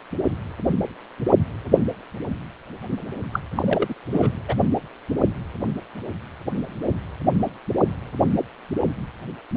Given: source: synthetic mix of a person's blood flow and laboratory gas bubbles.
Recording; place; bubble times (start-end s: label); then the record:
Doppler ultrasound of blood flow; precordium
3.33-3.40 s: bubbles
3.56-3.95 s: bubbles
4.11-4.32 s: bubbles
4.48-4.54 s: bubbles
From the record:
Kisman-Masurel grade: 212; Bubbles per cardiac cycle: several, 3 to 8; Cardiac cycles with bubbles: 1 to 10%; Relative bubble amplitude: moderate (0.250 to 0.450); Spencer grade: 1 (occasional bubble signal discernible with the cardiac motion signal, with majority of cardiac periods free of bubbles); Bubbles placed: anywhere in the cardiac cycle